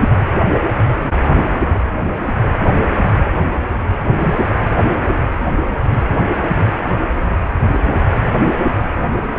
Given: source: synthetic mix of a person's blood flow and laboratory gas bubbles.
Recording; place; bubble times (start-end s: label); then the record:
Doppler ultrasound of blood flow; precordium
4.06-4.44 s: bubbles
From the record:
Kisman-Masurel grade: 212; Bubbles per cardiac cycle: several, 3 to 8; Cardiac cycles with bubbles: 1 to 10%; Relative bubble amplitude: moderate (0.250 to 0.450); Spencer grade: 1 (occasional bubble signal discernible with the cardiac motion signal, with majority of cardiac periods free of bubbles); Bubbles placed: anywhere in the cardiac cycle